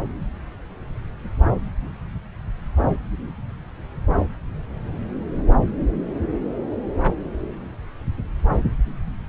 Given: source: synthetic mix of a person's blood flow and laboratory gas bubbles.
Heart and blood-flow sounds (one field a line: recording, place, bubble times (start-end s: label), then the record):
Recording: Doppler ultrasound of blood flow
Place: subclavian vein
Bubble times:
no bubbles
From the record:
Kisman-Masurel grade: 000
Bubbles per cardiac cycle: 0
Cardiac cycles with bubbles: 0%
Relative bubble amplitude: no bubbles discernible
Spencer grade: 0 (complete lack of bubble signals)